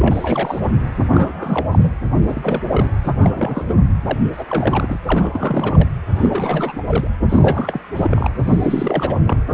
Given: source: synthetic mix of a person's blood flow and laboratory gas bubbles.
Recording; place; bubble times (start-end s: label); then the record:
Doppler ultrasound of blood flow; precordium
0.00-0.59 s: bubbles
0.62-0.72 s: bubbles
1.10-1.67 s: bubbles
1.71-1.91 s: bubbles
2.20-2.61 s: bubbles
2.73-2.89 s: bubbles
3.03-3.65 s: bubbles
3.67-3.74 s: bubbles
4.04-4.18 s: bubbles
4.32-4.44 s: bubbles
4.48-5.00 s: bubbles
5.05-5.88 s: bubbles
6.16-6.73 s: bubbles
6.87-7.08 s: bubbles
7.29-7.79 s: bubbles
7.96-8.30 s: bubbles
8.44-9.19 s: bubbles
9.23-9.43 s: bubbles
9.48-9.54 s: bubbles
From the record:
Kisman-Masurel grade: 342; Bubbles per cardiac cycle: rolling drumbeat, 9 or more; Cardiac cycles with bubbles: 100%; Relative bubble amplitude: moderate (0.250 to 0.450); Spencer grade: 3 (all of the cardiac periods contain showers or single bubble signals, but not dominating or overriding the cardiac motion signals); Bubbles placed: anywhere in the cardiac cycle